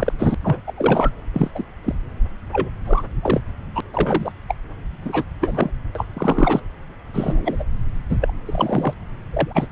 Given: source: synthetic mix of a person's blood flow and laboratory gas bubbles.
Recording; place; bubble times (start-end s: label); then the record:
Doppler ultrasound of blood flow; subclavian vein
0.00-0.14 s: bubbles
0.18-0.34 s: bubbles
0.43-0.60 s: bubbles
0.67-0.73 s: bubbles
0.77-1.11 s: bubbles
1.33-1.50 s: bubbles
1.54-1.64 s: bubbles
1.83-1.95 s: bubbles
2.52-2.69 s: bubbles
2.86-3.03 s: bubbles
3.21-3.41 s: bubbles
3.75-3.80 s: bubbles
3.93-4.32 s: bubbles
4.48-4.54 s: bubbles
5.05-5.24 s: bubbles
5.41-5.71 s: bubbles
5.95-6.06 s: bubbles
6.14-6.60 s: bubbles
7.13-7.65 s: bubbles
8.09-8.18 s: bubbles
8.21-8.34 s: bubbles
8.46-8.94 s: bubbles
9.31-9.67 s: bubbles
From the record:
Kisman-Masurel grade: 243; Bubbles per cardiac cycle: several, 3 to 8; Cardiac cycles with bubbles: 100%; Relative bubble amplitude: loud (0.450 to 0.775); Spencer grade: 3 (all of the cardiac periods contain showers or single bubble signals, but not dominating or overriding the cardiac motion signals); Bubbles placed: anywhere in the cardiac cycle